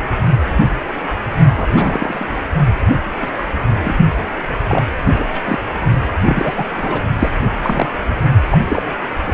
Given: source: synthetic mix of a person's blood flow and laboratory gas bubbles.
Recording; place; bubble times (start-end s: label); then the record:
Doppler ultrasound of blood flow; precordium
1.54-2.25 s: bubbles
3.22-3.31 s: bubbles
3.38-3.46 s: bubbles
3.80-3.94 s: bubbles
4.68-4.82 s: bubbles
5.18-5.25 s: bubbles
5.33-5.42 s: bubbles
5.44-5.59 s: bubbles
6.24-6.67 s: bubbles
6.74-7.02 s: bubbles
7.19-7.29 s: bubbles
7.62-7.88 s: bubbles
8.45-8.58 s: bubbles
8.64-8.82 s: bubbles
9.26-9.34 s: bubbles
From the record:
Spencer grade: 3 (all of the cardiac periods contain showers or single bubble signals, but not dominating or overriding the cardiac motion signals); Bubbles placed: only in the low amplitude regions of the cardiac cycle